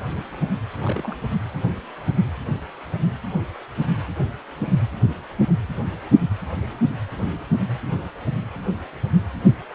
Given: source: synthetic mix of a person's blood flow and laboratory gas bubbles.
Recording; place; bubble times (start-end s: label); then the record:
Doppler ultrasound of blood flow; precordium
0.82-1.20 s: bubbles
From the record:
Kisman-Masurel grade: 111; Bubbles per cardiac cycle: 1 to 2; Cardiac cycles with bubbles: 1 to 10%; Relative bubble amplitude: barely perceptible (0.100 to 0.250); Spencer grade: 1 (occasional bubble signal discernible with the cardiac motion signal, with majority of cardiac periods free of bubbles); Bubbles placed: anywhere in the cardiac cycle